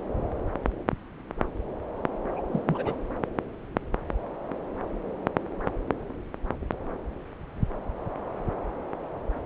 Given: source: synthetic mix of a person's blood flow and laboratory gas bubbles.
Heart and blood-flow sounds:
Doppler ultrasound of blood flow; subclavian vein
2.33-2.43 s: bubbles
2.53-2.60 s: bubbles
2.64-2.97 s: bubbles
From the record:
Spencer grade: 1 (occasional bubble signal discernible with the cardiac motion signal, with majority of cardiac periods free of bubbles); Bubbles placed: anywhere in the cardiac cycle

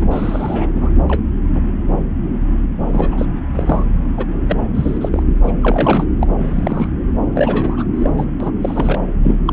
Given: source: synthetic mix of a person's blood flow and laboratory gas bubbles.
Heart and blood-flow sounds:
Doppler ultrasound of blood flow; subclavian vein
0.01-0.70 s: bubbles
0.76-0.91 s: bubbles
1.09-1.23 s: bubbles
1.52-1.60 s: bubbles
2.85-3.25 s: bubbles
3.54-3.84 s: bubbles
4.17-4.25 s: bubbles
4.49-4.57 s: bubbles
4.74-5.08 s: bubbles
5.12-5.23 s: bubbles
5.43-5.51 s: bubbles
5.60-6.04 s: bubbles
6.21-6.28 s: bubbles
6.38-6.88 s: bubbles
7.33-7.85 s: bubbles
7.93-8.10 s: bubbles
8.17-8.26 s: bubbles
8.40-8.51 s: bubbles
8.62-8.98 s: bubbles
9.23-9.37 s: bubbles
9.46-9.53 s: bubbles
From the record:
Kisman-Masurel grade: 232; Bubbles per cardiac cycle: several, 3 to 8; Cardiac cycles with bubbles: 50 to 99%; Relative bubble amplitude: moderate (0.250 to 0.450); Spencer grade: 3 (all of the cardiac periods contain showers or single bubble signals, but not dominating or overriding the cardiac motion signals); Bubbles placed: anywhere in the cardiac cycle

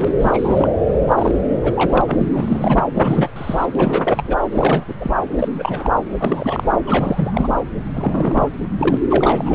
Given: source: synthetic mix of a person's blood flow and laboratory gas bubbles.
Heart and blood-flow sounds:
Doppler ultrasound of blood flow; subclavian vein
0.00-0.05 s: bubbles
0.18-0.69 s: bubbles
1.08-1.35 s: bubbles
1.63-2.02 s: bubbles
2.06-2.81 s: bubbles
2.93-3.29 s: bubbles
3.36-3.67 s: bubbles
3.75-4.23 s: bubbles
4.27-4.36 s: bubbles
4.51-4.84 s: bubbles
4.87-4.94 s: bubbles
5.00-5.17 s: bubbles
5.38-5.48 s: bubbles
5.54-5.92 s: bubbles
6.19-6.79 s: bubbles
6.86-7.49 s: bubbles
7.95-8.48 s: bubbles
8.79-8.97 s: bubbles
9.10-9.55 s: bubbles
From the record:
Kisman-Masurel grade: 342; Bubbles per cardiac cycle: rolling drumbeat, 9 or more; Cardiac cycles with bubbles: 100%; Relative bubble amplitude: moderate (0.250 to 0.450); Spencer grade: 3 (all of the cardiac periods contain showers or single bubble signals, but not dominating or overriding the cardiac motion signals); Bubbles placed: anywhere in the cardiac cycle

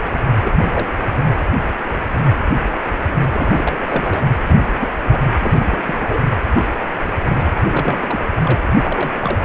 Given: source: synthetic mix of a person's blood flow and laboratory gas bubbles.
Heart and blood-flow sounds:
Doppler ultrasound of blood flow; precordium
0.43-0.52 s: bubbles
0.57-0.86 s: bubbles
3.30-3.85 s: bubbles
3.88-4.21 s: bubbles
4.47-4.58 s: bubbles
4.79-4.89 s: bubbles
5.03-5.34 s: bubbles
5.41-6.20 s: bubbles
6.55-6.65 s: bubbles
7.04-7.11 s: bubbles
7.35-7.51 s: bubbles
7.63-8.20 s: bubbles
8.43-8.59 s: bubbles
8.80-9.11 s: bubbles
9.21-9.39 s: bubbles
From the record:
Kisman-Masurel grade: 232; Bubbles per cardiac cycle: several, 3 to 8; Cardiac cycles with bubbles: 50 to 99%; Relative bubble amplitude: moderate (0.250 to 0.450); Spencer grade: 3 (all of the cardiac periods contain showers or single bubble signals, but not dominating or overriding the cardiac motion signals); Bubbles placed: anywhere in the cardiac cycle

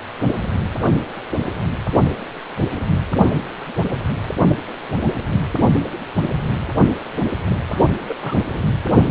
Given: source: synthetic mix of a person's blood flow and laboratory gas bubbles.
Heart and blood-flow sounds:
Doppler ultrasound of blood flow; precordium
7.50-7.54 s: bubbles
7.69-7.88 s: bubbles
8.08-8.16 s: bubbles
8.19-8.36 s: bubbles
8.51-8.71 s: bubbles
From the record:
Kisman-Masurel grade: 211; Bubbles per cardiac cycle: several, 3 to 8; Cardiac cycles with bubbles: 1 to 10%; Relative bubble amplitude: barely perceptible (0.100 to 0.250); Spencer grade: 1 (occasional bubble signal discernible with the cardiac motion signal, with majority of cardiac periods free of bubbles); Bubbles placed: only in the low amplitude regions of the cardiac cycle

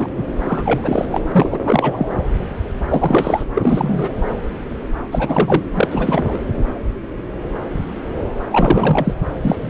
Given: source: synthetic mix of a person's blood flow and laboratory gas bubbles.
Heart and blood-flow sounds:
Doppler ultrasound of blood flow; subclavian vein
0.00-0.08 s: bubbles
0.16-0.25 s: bubbles
0.48-1.05 s: bubbles
1.10-1.21 s: bubbles
1.31-1.58 s: bubbles
1.62-2.06 s: bubbles
2.88-3.46 s: bubbles
3.54-4.09 s: bubbles
5.12-5.63 s: bubbles
5.75-6.38 s: bubbles
8.51-9.14 s: bubbles
9.35-9.70 s: bubbles
From the record:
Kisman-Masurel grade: 333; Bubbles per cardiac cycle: rolling drumbeat, 9 or more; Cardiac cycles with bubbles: 50 to 99%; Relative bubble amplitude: loud (0.450 to 0.775); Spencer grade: 3 (all of the cardiac periods contain showers or single bubble signals, but not dominating or overriding the cardiac motion signals); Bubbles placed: anywhere in the cardiac cycle

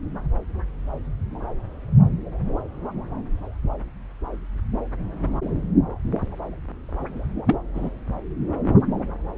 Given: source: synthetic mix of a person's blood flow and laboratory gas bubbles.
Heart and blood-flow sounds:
Doppler ultrasound of blood flow; subclavian vein
7.46-7.57 s: bubbles
7.75-7.90 s: bubbles
From the record:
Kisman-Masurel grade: 112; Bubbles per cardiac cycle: 1 to 2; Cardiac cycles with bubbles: 1 to 10%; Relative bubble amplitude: moderate (0.250 to 0.450); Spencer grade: 1 (occasional bubble signal discernible with the cardiac motion signal, with majority of cardiac periods free of bubbles); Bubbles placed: anywhere in the cardiac cycle

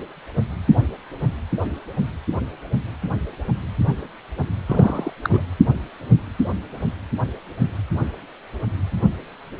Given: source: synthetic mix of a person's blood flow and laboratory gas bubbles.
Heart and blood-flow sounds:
Doppler ultrasound of blood flow; precordium
4.66-5.13 s: bubbles
5.23-5.29 s: bubbles
5.33-5.44 s: bubbles
From the record:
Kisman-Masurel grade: 222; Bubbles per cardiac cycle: several, 3 to 8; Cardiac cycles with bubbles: 10 to 50%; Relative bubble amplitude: moderate (0.250 to 0.450); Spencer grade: 2 (many but less than half of the cardiac periods contain bubble signals, singularly or in groups); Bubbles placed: anywhere in the cardiac cycle

